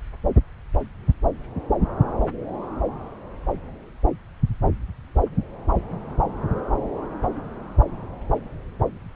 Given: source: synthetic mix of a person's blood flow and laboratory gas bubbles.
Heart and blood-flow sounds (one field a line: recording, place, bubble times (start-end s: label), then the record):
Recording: Doppler ultrasound of blood flow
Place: subclavian vein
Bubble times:
no bubbles
From the record:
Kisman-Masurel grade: 000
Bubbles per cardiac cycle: 0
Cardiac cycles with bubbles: 0%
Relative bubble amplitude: no bubbles discernible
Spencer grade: 0 (complete lack of bubble signals)